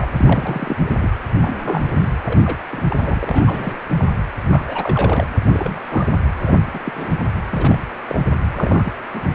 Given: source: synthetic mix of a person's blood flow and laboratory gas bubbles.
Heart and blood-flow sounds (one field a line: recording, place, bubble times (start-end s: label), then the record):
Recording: Doppler ultrasound of blood flow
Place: precordium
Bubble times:
0.00-0.07 s: bubbles
0.17-0.77 s: bubbles
1.01-1.09 s: bubbles
1.42-1.84 s: bubbles
1.98-2.10 s: bubbles
2.25-2.65 s: bubbles
2.72-2.83 s: bubbles
2.89-3.79 s: bubbles
3.97-4.05 s: bubbles
4.50-4.64 s: bubbles
4.67-5.25 s: bubbles
5.50-5.79 s: bubbles
5.88-6.05 s: bubbles
6.38-6.66 s: bubbles
6.73-6.79 s: bubbles
6.84-7.19 s: bubbles
7.50-7.78 s: bubbles
8.08-8.26 s: bubbles
8.51-8.93 s: bubbles
9.14-9.21 s: bubbles
From the record:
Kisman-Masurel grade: 242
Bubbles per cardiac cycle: several, 3 to 8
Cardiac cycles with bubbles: 100%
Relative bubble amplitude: moderate (0.250 to 0.450)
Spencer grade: 3 (all of the cardiac periods contain showers or single bubble signals, but not dominating or overriding the cardiac motion signals)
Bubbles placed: anywhere in the cardiac cycle